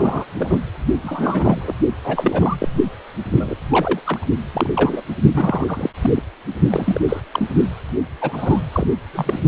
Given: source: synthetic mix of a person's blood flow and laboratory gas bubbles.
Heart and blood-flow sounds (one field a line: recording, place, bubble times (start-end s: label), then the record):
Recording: Doppler ultrasound of blood flow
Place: precordium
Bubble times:
0.00-0.26 s: bubbles
0.38-0.58 s: bubbles
1.02-1.73 s: bubbles
2.03-2.56 s: bubbles
2.58-2.68 s: bubbles
3.31-3.55 s: bubbles
3.69-4.00 s: bubbles
4.04-4.26 s: bubbles
4.52-5.04 s: bubbles
5.31-5.90 s: bubbles
6.02-6.10 s: bubbles
6.16-6.22 s: bubbles
6.70-7.00 s: bubbles
7.08-7.21 s: bubbles
7.31-7.49 s: bubbles
8.21-8.61 s: bubbles
8.72-8.88 s: bubbles
9.13-9.40 s: bubbles
From the record:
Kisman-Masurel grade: 242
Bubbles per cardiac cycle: several, 3 to 8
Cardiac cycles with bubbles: 100%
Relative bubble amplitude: moderate (0.250 to 0.450)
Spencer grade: 3 (all of the cardiac periods contain showers or single bubble signals, but not dominating or overriding the cardiac motion signals)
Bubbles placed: only in the low amplitude regions of the cardiac cycle